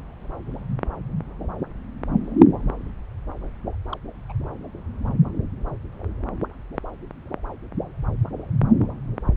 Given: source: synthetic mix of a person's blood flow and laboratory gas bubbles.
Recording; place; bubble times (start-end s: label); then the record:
Doppler ultrasound of blood flow; subclavian vein
3.93-3.98 s: bubbles
4.29-4.33 s: bubbles
From the record:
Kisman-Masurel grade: 111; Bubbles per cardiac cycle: 1 to 2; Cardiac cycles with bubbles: 1 to 10%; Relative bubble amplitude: barely perceptible (0.100 to 0.250); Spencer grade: 1 (occasional bubble signal discernible with the cardiac motion signal, with majority of cardiac periods free of bubbles); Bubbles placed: anywhere in the cardiac cycle